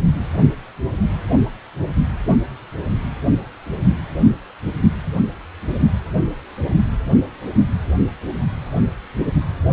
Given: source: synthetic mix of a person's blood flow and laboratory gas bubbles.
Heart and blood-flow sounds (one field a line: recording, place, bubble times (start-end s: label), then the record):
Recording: Doppler ultrasound of blood flow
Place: precordium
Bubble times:
4.83-4.89 s: bubbles
From the record:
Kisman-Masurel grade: 121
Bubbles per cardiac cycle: 1 to 2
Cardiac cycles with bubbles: 10 to 50%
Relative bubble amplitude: barely perceptible (0.100 to 0.250)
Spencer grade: 2 (many but less than half of the cardiac periods contain bubble signals, singularly or in groups)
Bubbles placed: anywhere in the cardiac cycle